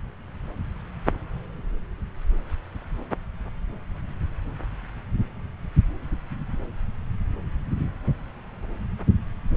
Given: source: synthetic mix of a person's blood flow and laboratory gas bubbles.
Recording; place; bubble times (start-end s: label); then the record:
Doppler ultrasound of blood flow; subclavian vein
no bubbles
From the record:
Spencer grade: 0 (complete lack of bubble signals)